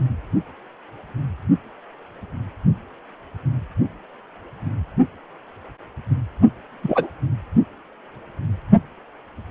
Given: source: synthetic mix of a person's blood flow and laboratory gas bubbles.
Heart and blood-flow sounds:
Doppler ultrasound of blood flow; precordium
6.82-7.08 s: bubbles
From the record:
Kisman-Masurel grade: 113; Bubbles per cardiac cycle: 1 to 2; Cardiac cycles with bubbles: 1 to 10%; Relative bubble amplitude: loud (0.450 to 0.775); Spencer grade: 1 (occasional bubble signal discernible with the cardiac motion signal, with majority of cardiac periods free of bubbles); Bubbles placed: only in the low amplitude regions of the cardiac cycle

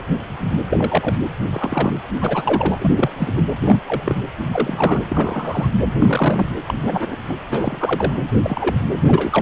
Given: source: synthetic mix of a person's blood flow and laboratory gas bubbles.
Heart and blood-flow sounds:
Doppler ultrasound of blood flow; precordium
0.70-1.24 s: bubbles
1.53-1.93 s: bubbles
2.21-3.43 s: bubbles
3.63-3.77 s: bubbles
3.86-4.20 s: bubbles
4.52-5.00 s: bubbles
5.10-5.69 s: bubbles
5.99-6.49 s: bubbles
6.68-6.74 s: bubbles
6.81-7.17 s: bubbles
7.27-7.37 s: bubbles
7.50-8.13 s: bubbles
8.42-8.75 s: bubbles
9.07-9.42 s: bubbles
From the record:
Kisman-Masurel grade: 242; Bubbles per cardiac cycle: several, 3 to 8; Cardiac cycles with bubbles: 100%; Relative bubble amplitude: moderate (0.250 to 0.450); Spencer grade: 3 (all of the cardiac periods contain showers or single bubble signals, but not dominating or overriding the cardiac motion signals); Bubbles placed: anywhere in the cardiac cycle

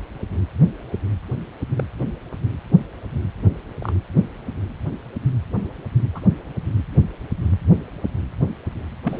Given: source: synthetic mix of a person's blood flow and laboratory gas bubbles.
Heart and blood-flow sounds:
Doppler ultrasound of blood flow; precordium
1.76-1.83 s: bubbles
3.81-3.93 s: bubbles
6.13-6.20 s: bubbles
9.04-9.20 s: bubbles
From the record:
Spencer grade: 2 (many but less than half of the cardiac periods contain bubble signals, singularly or in groups); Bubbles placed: anywhere in the cardiac cycle

